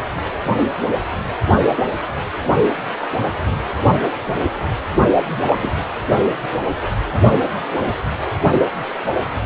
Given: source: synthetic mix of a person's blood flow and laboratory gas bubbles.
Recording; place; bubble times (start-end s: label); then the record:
Doppler ultrasound of blood flow; precordium
5.16-5.24 s: bubbles
5.46-5.58 s: bubbles
5.62-5.71 s: bubbles
From the record:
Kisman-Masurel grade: 212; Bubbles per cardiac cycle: several, 3 to 8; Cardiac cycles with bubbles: 1 to 10%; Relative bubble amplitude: moderate (0.250 to 0.450); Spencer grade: 1 (occasional bubble signal discernible with the cardiac motion signal, with majority of cardiac periods free of bubbles); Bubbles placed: anywhere in the cardiac cycle